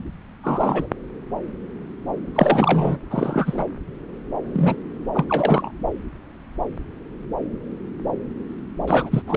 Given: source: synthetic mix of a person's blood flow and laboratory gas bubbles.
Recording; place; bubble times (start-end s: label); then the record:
Doppler ultrasound of blood flow; subclavian vein
0.43-0.88 s: bubbles
2.34-2.98 s: bubbles
3.10-3.64 s: bubbles
4.53-4.76 s: bubbles
5.14-5.25 s: bubbles
5.29-5.71 s: bubbles
8.88-9.22 s: bubbles
9.27-9.36 s: bubbles
From the record:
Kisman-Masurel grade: 222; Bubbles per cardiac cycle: several, 3 to 8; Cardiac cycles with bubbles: 10 to 50%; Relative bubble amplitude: moderate (0.250 to 0.450); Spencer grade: 2 (many but less than half of the cardiac periods contain bubble signals, singularly or in groups); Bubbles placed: anywhere in the cardiac cycle